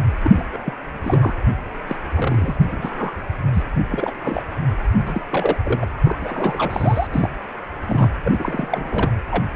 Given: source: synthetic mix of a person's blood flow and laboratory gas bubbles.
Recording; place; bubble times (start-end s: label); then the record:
Doppler ultrasound of blood flow; precordium
0.00-0.04 s: bubbles
0.23-0.31 s: bubbles
0.34-0.43 s: bubbles
0.53-0.58 s: bubbles
0.64-0.73 s: bubbles
1.03-1.34 s: bubbles
1.88-1.96 s: bubbles
2.17-3.25 s: bubbles
3.53-3.63 s: bubbles
3.90-4.12 s: bubbles
4.24-4.43 s: bubbles
4.97-5.21 s: bubbles
5.31-5.58 s: bubbles
5.63-5.88 s: bubbles
6.04-7.07 s: bubbles
7.12-7.29 s: bubbles
7.87-8.10 s: bubbles
8.24-9.12 s: bubbles
9.31-9.45 s: bubbles
9.53-9.56 s: bubbles
From the record:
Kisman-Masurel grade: 342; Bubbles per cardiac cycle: rolling drumbeat, 9 or more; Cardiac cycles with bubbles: 100%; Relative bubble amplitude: moderate (0.250 to 0.450); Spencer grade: 3 (all of the cardiac periods contain showers or single bubble signals, but not dominating or overriding the cardiac motion signals); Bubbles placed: anywhere in the cardiac cycle